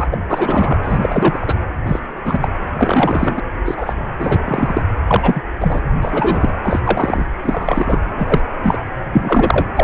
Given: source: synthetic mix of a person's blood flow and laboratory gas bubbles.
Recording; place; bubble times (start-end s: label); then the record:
Doppler ultrasound of blood flow; precordium
0.00-0.08 s: bubbles
0.11-0.17 s: bubbles
0.30-0.78 s: bubbles
0.82-0.98 s: bubbles
1.01-1.56 s: bubbles
1.85-2.00 s: bubbles
2.25-2.48 s: bubbles
2.77-3.40 s: bubbles
3.65-3.94 s: bubbles
4.19-4.40 s: bubbles
4.45-4.83 s: bubbles
5.07-5.41 s: bubbles
5.61-5.81 s: bubbles
6.02-6.53 s: bubbles
6.63-6.80 s: bubbles
6.84-7.26 s: bubbles
7.43-8.00 s: bubbles
8.18-8.40 s: bubbles
8.63-8.78 s: bubbles
9.12-9.64 s: bubbles
9.75-9.84 s: bubbles
From the record:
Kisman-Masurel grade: 243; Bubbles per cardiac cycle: several, 3 to 8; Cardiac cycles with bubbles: 100%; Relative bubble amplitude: loud (0.450 to 0.775); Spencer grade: 3 (all of the cardiac periods contain showers or single bubble signals, but not dominating or overriding the cardiac motion signals); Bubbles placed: anywhere in the cardiac cycle